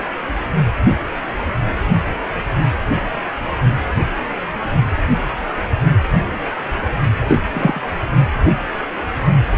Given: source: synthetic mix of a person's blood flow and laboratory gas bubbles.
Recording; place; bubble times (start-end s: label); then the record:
Doppler ultrasound of blood flow; precordium
7.27-7.38 s: bubbles
7.54-7.79 s: bubbles
From the record:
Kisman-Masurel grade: 113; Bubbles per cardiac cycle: 1 to 2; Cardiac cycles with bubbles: 1 to 10%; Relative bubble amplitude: loud (0.450 to 0.775); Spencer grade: 1 (occasional bubble signal discernible with the cardiac motion signal, with majority of cardiac periods free of bubbles); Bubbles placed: only in the low amplitude regions of the cardiac cycle